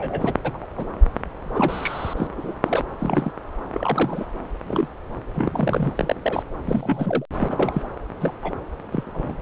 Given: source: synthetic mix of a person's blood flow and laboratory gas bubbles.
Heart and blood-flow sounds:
Doppler ultrasound of blood flow; subclavian vein
0.00-0.33 s: bubbles
0.44-0.66 s: bubbles
0.77-0.86 s: bubbles
1.44-2.13 s: bubbles
2.16-2.27 s: bubbles
2.37-2.54 s: bubbles
2.64-2.85 s: bubbles
2.98-3.33 s: bubbles
3.73-4.26 s: bubbles
4.68-4.88 s: bubbles
5.33-5.93 s: bubbles
5.97-6.14 s: bubbles
6.22-6.43 s: bubbles
6.64-7.26 s: bubbles
7.39-7.86 s: bubbles
8.21-8.34 s: bubbles
8.43-8.53 s: bubbles
8.92-9.36 s: bubbles
From the record:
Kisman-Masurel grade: 242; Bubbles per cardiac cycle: several, 3 to 8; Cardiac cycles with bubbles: 100%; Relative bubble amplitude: moderate (0.250 to 0.450); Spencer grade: 3 (all of the cardiac periods contain showers or single bubble signals, but not dominating or overriding the cardiac motion signals); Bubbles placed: anywhere in the cardiac cycle

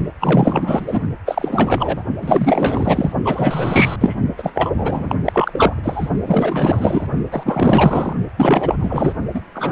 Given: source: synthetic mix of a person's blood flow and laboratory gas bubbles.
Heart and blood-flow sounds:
Doppler ultrasound of blood flow; precordium
0.20-1.00 s: bubbles
1.25-2.04 s: bubbles
2.21-3.12 s: bubbles
3.24-3.96 s: bubbles
3.99-4.21 s: bubbles
4.38-4.71 s: bubbles
4.75-5.15 s: bubbles
5.25-6.10 s: bubbles
6.25-7.07 s: bubbles
7.32-8.13 s: bubbles
8.37-9.12 s: bubbles
9.34-9.41 s: bubbles
9.54-9.71 s: bubbles
From the record:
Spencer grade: 4 (maximum detectable bubble signal sounding continuously throughout systole and diastole of every cardiac period, and overriding the amplitude of the normal cardiac signals); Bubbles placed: only in the low amplitude regions of the cardiac cycle

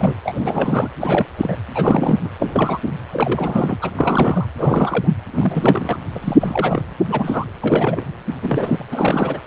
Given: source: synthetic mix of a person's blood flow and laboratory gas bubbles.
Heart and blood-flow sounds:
Doppler ultrasound of blood flow; precordium
0.00-0.14 s: bubbles
0.24-0.89 s: bubbles
1.01-1.26 s: bubbles
1.37-1.56 s: bubbles
1.74-2.19 s: bubbles
2.23-2.29 s: bubbles
2.38-2.80 s: bubbles
2.86-2.91 s: bubbles
3.12-3.77 s: bubbles
3.81-3.90 s: bubbles
3.95-4.46 s: bubbles
4.58-5.12 s: bubbles
5.33-6.00 s: bubbles
6.15-6.37 s: bubbles
6.40-6.83 s: bubbles
7.10-7.45 s: bubbles
7.62-8.04 s: bubbles
8.41-8.85 s: bubbles
8.91-9.40 s: bubbles
From the record:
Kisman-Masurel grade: 342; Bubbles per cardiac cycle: rolling drumbeat, 9 or more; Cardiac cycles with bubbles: 100%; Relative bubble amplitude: moderate (0.250 to 0.450); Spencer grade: 3 (all of the cardiac periods contain showers or single bubble signals, but not dominating or overriding the cardiac motion signals); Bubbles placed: anywhere in the cardiac cycle

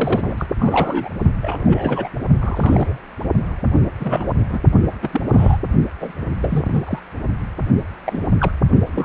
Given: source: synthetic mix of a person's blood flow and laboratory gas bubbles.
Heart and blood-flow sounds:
Doppler ultrasound of blood flow; precordium
0.00-0.46 s: bubbles
0.59-1.09 s: bubbles
1.42-2.09 s: bubbles
2.39-2.97 s: bubbles
4.00-4.29 s: bubbles
4.49-4.58 s: bubbles
5.02-5.10 s: bubbles
5.12-5.21 s: bubbles
5.29-5.57 s: bubbles
6.00-6.13 s: bubbles
6.42-7.00 s: bubbles
8.04-8.32 s: bubbles
8.39-8.51 s: bubbles
8.96-9.04 s: bubbles
From the record:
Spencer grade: 3 (all of the cardiac periods contain showers or single bubble signals, but not dominating or overriding the cardiac motion signals); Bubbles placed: only in the low amplitude regions of the cardiac cycle

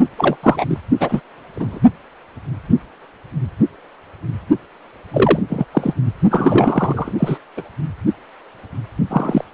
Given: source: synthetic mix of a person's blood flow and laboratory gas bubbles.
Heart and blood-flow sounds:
Doppler ultrasound of blood flow; precordium
0.17-0.37 s: bubbles
0.43-0.65 s: bubbles
0.68-0.79 s: bubbles
1.00-1.21 s: bubbles
1.56-1.79 s: bubbles
5.12-5.40 s: bubbles
5.49-5.65 s: bubbles
5.71-5.94 s: bubbles
6.30-7.12 s: bubbles
7.19-7.38 s: bubbles
7.57-7.62 s: bubbles
9.09-9.44 s: bubbles
From the record:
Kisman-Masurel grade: 233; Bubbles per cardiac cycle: several, 3 to 8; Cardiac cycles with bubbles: 50 to 99%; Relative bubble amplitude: loud (0.450 to 0.775); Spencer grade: 3 (all of the cardiac periods contain showers or single bubble signals, but not dominating or overriding the cardiac motion signals); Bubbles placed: only in the low amplitude regions of the cardiac cycle

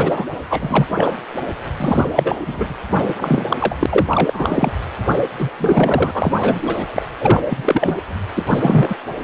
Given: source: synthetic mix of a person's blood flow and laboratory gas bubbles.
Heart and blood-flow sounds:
Doppler ultrasound of blood flow; precordium
0.00-0.25 s: bubbles
0.49-0.86 s: bubbles
0.94-1.18 s: bubbles
1.76-2.08 s: bubbles
2.15-2.36 s: bubbles
2.46-2.75 s: bubbles
2.96-3.45 s: bubbles
3.50-3.57 s: bubbles
3.60-3.76 s: bubbles
3.80-3.86 s: bubbles
3.89-4.71 s: bubbles
5.38-5.50 s: bubbles
5.58-6.11 s: bubbles
6.13-7.06 s: bubbles
7.19-7.42 s: bubbles
7.49-7.98 s: bubbles
8.36-8.96 s: bubbles
From the record:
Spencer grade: 3 (all of the cardiac periods contain showers or single bubble signals, but not dominating or overriding the cardiac motion signals); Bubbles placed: anywhere in the cardiac cycle

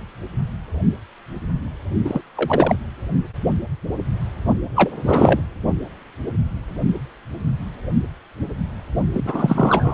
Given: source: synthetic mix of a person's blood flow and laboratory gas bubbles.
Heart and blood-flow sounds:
Doppler ultrasound of blood flow; precordium
2.05-2.22 s: bubbles
2.37-2.76 s: bubbles
4.75-4.91 s: bubbles
5.06-5.41 s: bubbles
9.13-9.94 s: bubbles
From the record:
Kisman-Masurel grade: 223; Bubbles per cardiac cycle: several, 3 to 8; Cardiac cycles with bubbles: 10 to 50%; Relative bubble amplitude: loud (0.450 to 0.775); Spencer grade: 2 (many but less than half of the cardiac periods contain bubble signals, singularly or in groups); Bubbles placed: only in the low amplitude regions of the cardiac cycle

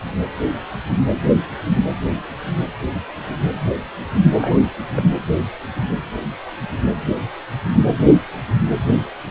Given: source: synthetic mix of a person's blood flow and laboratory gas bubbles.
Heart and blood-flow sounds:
Doppler ultrasound of blood flow; precordium
4.38-4.60 s: bubbles
4.95-5.03 s: bubbles
From the record:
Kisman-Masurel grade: 211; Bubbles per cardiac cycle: several, 3 to 8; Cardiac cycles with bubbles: 1 to 10%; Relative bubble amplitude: barely perceptible (0.100 to 0.250); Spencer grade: 1 (occasional bubble signal discernible with the cardiac motion signal, with majority of cardiac periods free of bubbles); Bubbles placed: anywhere in the cardiac cycle

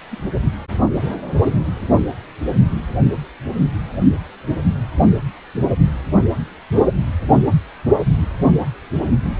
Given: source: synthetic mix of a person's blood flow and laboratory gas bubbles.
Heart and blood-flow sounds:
Doppler ultrasound of blood flow; precordium
0.11-0.20 s: bubbles
0.36-0.39 s: bubbles
From the record:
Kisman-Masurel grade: 111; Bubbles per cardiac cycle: 1 to 2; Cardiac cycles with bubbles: 1 to 10%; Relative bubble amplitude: barely perceptible (0.100 to 0.250); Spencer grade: 1 (occasional bubble signal discernible with the cardiac motion signal, with majority of cardiac periods free of bubbles); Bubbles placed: anywhere in the cardiac cycle

